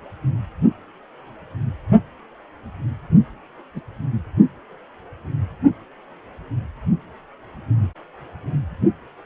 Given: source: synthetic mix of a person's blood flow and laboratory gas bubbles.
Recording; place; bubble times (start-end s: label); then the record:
Doppler ultrasound of blood flow; precordium
3.75-3.81 s: bubbles
From the record:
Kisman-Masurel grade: 112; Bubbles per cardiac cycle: 1 to 2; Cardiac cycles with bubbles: 1 to 10%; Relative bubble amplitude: moderate (0.250 to 0.450); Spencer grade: 1 (occasional bubble signal discernible with the cardiac motion signal, with majority of cardiac periods free of bubbles); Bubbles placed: anywhere in the cardiac cycle